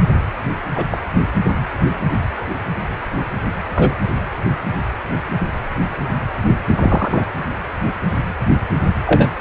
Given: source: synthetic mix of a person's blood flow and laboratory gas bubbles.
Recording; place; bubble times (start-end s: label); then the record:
Doppler ultrasound of blood flow; precordium
0.74-0.86 s: bubbles
0.90-0.98 s: bubbles
3.75-3.94 s: bubbles
6.75-7.24 s: bubbles
9.06-9.30 s: bubbles
From the record:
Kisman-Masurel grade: 123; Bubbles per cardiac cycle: 1 to 2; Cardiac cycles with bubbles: 10 to 50%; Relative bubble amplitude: loud (0.450 to 0.775); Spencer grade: 2 (many but less than half of the cardiac periods contain bubble signals, singularly or in groups); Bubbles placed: anywhere in the cardiac cycle